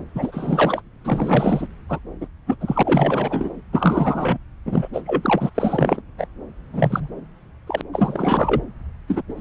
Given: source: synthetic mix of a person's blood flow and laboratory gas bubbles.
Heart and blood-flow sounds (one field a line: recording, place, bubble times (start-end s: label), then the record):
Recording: Doppler ultrasound of blood flow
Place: subclavian vein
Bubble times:
0.15-0.81 s: bubbles
1.04-1.67 s: bubbles
1.89-1.98 s: bubbles
2.21-2.27 s: bubbles
2.47-2.56 s: bubbles
2.60-3.52 s: bubbles
3.72-4.38 s: bubbles
4.65-4.88 s: bubbles
4.93-5.00 s: bubbles
5.06-5.50 s: bubbles
5.54-6.02 s: bubbles
6.18-6.27 s: bubbles
6.72-7.08 s: bubbles
7.67-7.82 s: bubbles
7.92-8.61 s: bubbles
9.08-9.22 s: bubbles
9.29-9.34 s: bubbles
9.37-9.41 s: bubbles
From the record:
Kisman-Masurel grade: 342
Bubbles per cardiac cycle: rolling drumbeat, 9 or more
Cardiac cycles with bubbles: 100%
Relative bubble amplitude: moderate (0.250 to 0.450)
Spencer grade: 3 (all of the cardiac periods contain showers or single bubble signals, but not dominating or overriding the cardiac motion signals)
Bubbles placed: anywhere in the cardiac cycle